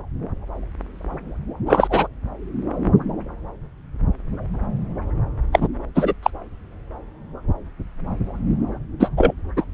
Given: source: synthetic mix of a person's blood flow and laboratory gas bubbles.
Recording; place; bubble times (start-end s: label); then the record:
Doppler ultrasound of blood flow; subclavian vein
1.65-2.07 s: bubbles
5.52-5.68 s: bubbles
5.95-6.13 s: bubbles
6.22-6.30 s: bubbles
9.00-9.09 s: bubbles
9.17-9.33 s: bubbles
9.57-9.66 s: bubbles
From the record:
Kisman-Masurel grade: 223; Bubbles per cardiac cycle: several, 3 to 8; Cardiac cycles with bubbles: 10 to 50%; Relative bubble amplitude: loud (0.450 to 0.775); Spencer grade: 2 (many but less than half of the cardiac periods contain bubble signals, singularly or in groups); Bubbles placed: anywhere in the cardiac cycle